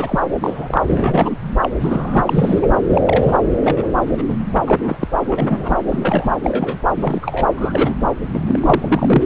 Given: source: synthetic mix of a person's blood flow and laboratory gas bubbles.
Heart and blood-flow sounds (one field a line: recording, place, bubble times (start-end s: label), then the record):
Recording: Doppler ultrasound of blood flow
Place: subclavian vein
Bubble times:
0.00-0.21 s: bubbles
0.41-0.81 s: bubbles
0.88-1.30 s: bubbles
1.62-1.69 s: bubbles
1.79-2.68 s: bubbles
2.89-3.02 s: bubbles
3.06-3.38 s: bubbles
3.63-3.87 s: bubbles
4.17-4.24 s: bubbles
4.28-4.38 s: bubbles
4.58-4.97 s: bubbles
5.00-5.08 s: bubbles
5.29-5.77 s: bubbles
5.88-6.33 s: bubbles
6.44-6.79 s: bubbles
6.96-7.50 s: bubbles
7.57-7.96 s: bubbles
8.31-9.26 s: bubbles
From the record:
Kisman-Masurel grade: 243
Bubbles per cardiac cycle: several, 3 to 8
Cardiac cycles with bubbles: 100%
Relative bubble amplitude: loud (0.450 to 0.775)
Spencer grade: 3 (all of the cardiac periods contain showers or single bubble signals, but not dominating or overriding the cardiac motion signals)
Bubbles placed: anywhere in the cardiac cycle